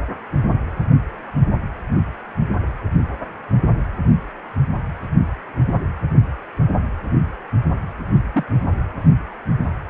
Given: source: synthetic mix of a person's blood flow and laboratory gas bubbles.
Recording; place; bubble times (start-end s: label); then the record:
Doppler ultrasound of blood flow; precordium
8.34-8.45 s: bubbles
From the record:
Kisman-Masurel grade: 112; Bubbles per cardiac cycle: 1 to 2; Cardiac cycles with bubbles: 1 to 10%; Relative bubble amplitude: moderate (0.250 to 0.450); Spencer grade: 1 (occasional bubble signal discernible with the cardiac motion signal, with majority of cardiac periods free of bubbles); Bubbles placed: anywhere in the cardiac cycle